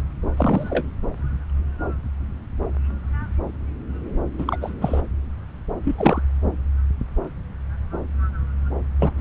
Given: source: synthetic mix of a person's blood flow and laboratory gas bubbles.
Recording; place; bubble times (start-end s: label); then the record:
Doppler ultrasound of blood flow; subclavian vein
0.36-0.85 s: bubbles
4.38-4.57 s: bubbles
4.61-4.72 s: bubbles
4.81-5.02 s: bubbles
5.84-6.24 s: bubbles
8.99-9.12 s: bubbles
9.18-9.21 s: bubbles
From the record:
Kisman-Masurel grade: 223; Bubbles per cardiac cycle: several, 3 to 8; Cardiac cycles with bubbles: 10 to 50%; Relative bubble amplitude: loud (0.450 to 0.775); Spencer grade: 2 (many but less than half of the cardiac periods contain bubble signals, singularly or in groups); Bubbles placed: anywhere in the cardiac cycle